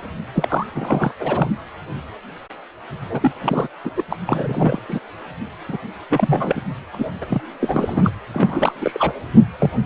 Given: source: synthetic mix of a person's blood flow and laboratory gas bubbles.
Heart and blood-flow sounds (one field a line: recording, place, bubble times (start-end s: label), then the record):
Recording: Doppler ultrasound of blood flow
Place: precordium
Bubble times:
0.34-0.66 s: bubbles
0.74-1.12 s: bubbles
1.20-1.50 s: bubbles
3.09-3.32 s: bubbles
3.42-3.68 s: bubbles
3.84-3.91 s: bubbles
3.95-4.04 s: bubbles
4.09-4.17 s: bubbles
4.27-4.79 s: bubbles
4.88-4.99 s: bubbles
5.68-5.78 s: bubbles
6.09-6.62 s: bubbles
6.93-6.95 s: bubbles
6.97-7.09 s: bubbles
7.21-7.25 s: bubbles
7.30-7.42 s: bubbles
7.60-8.11 s: bubbles
8.33-8.74 s: bubbles
8.81-9.14 s: bubbles
9.59-9.71 s: bubbles
From the record:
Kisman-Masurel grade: 332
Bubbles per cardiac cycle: rolling drumbeat, 9 or more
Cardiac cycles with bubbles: 50 to 99%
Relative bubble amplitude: moderate (0.250 to 0.450)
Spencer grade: 3 (all of the cardiac periods contain showers or single bubble signals, but not dominating or overriding the cardiac motion signals)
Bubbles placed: anywhere in the cardiac cycle